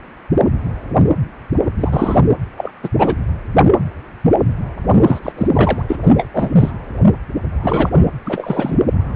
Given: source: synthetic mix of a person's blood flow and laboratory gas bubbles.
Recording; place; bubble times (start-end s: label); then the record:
Doppler ultrasound of blood flow; precordium
1.79-2.20 s: bubbles
2.57-2.72 s: bubbles
2.83-2.89 s: bubbles
2.98-3.16 s: bubbles
4.98-5.20 s: bubbles
5.22-5.32 s: bubbles
5.37-5.47 s: bubbles
5.53-5.82 s: bubbles
5.89-5.96 s: bubbles
6.04-6.12 s: bubbles
6.17-6.27 s: bubbles
6.33-6.50 s: bubbles
6.57-6.71 s: bubbles
7.63-8.07 s: bubbles
8.24-8.76 s: bubbles
From the record:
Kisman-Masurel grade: 223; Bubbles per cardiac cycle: several, 3 to 8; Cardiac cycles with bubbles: 10 to 50%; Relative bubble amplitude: loud (0.450 to 0.775); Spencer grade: 2 (many but less than half of the cardiac periods contain bubble signals, singularly or in groups); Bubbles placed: anywhere in the cardiac cycle